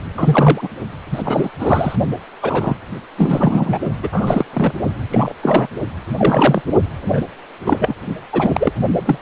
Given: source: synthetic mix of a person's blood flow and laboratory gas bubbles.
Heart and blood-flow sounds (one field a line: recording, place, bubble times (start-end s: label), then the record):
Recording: Doppler ultrasound of blood flow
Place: precordium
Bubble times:
0.17-0.69 s: bubbles
1.11-1.50 s: bubbles
1.59-1.96 s: bubbles
2.42-2.75 s: bubbles
3.17-3.78 s: bubbles
4.03-4.08 s: bubbles
4.12-4.45 s: bubbles
4.53-4.73 s: bubbles
5.10-5.33 s: bubbles
5.43-5.68 s: bubbles
6.17-6.61 s: bubbles
7.01-7.21 s: bubbles
7.66-7.94 s: bubbles
8.32-8.71 s: bubbles
9.05-9.17 s: bubbles
From the record:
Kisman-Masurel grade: 243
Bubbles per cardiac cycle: several, 3 to 8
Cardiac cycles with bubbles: 100%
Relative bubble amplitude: loud (0.450 to 0.775)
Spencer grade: 3 (all of the cardiac periods contain showers or single bubble signals, but not dominating or overriding the cardiac motion signals)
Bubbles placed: only in the low amplitude regions of the cardiac cycle